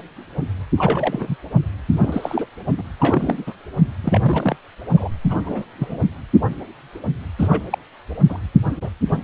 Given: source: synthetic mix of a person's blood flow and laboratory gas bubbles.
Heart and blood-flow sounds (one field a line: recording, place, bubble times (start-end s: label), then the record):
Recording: Doppler ultrasound of blood flow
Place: precordium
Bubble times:
0.77-1.36 s: bubbles
2.02-2.46 s: bubbles
2.77-2.83 s: bubbles
3.00-3.54 s: bubbles
4.04-4.56 s: bubbles
4.92-5.08 s: bubbles
5.30-5.65 s: bubbles
5.79-6.00 s: bubbles
7.39-7.64 s: bubbles
7.70-7.78 s: bubbles
8.29-8.40 s: bubbles
8.81-8.89 s: bubbles
From the record:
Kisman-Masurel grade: 232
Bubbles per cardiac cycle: several, 3 to 8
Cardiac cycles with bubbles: 50 to 99%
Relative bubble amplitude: moderate (0.250 to 0.450)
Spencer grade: 3 (all of the cardiac periods contain showers or single bubble signals, but not dominating or overriding the cardiac motion signals)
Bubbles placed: anywhere in the cardiac cycle